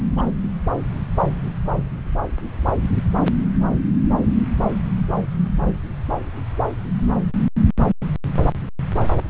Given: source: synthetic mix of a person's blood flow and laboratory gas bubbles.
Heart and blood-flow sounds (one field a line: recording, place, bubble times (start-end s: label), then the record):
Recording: Doppler ultrasound of blood flow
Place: subclavian vein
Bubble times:
0.17-0.27 s: bubbles
From the record:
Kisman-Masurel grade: 211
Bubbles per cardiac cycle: several, 3 to 8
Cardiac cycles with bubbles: 1 to 10%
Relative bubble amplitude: barely perceptible (0.100 to 0.250)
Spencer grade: 1 (occasional bubble signal discernible with the cardiac motion signal, with majority of cardiac periods free of bubbles)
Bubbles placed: anywhere in the cardiac cycle